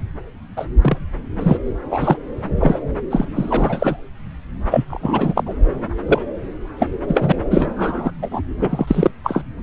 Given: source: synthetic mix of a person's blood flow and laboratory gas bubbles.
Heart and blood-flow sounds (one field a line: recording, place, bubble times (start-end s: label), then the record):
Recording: Doppler ultrasound of blood flow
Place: subclavian vein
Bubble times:
0.56-0.66 s: bubbles
0.81-0.97 s: bubbles
1.40-1.58 s: bubbles
1.90-2.17 s: bubbles
2.56-2.81 s: bubbles
3.10-3.25 s: bubbles
3.35-4.01 s: bubbles
4.70-4.85 s: bubbles
4.88-5.54 s: bubbles
6.08-6.19 s: bubbles
6.79-6.87 s: bubbles
7.08-7.33 s: bubbles
7.50-8.11 s: bubbles
8.22-8.42 s: bubbles
8.62-9.11 s: bubbles
9.23-9.43 s: bubbles
From the record:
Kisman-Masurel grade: 243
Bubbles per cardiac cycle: several, 3 to 8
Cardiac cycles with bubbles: 100%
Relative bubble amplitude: loud (0.450 to 0.775)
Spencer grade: 3 (all of the cardiac periods contain showers or single bubble signals, but not dominating or overriding the cardiac motion signals)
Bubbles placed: anywhere in the cardiac cycle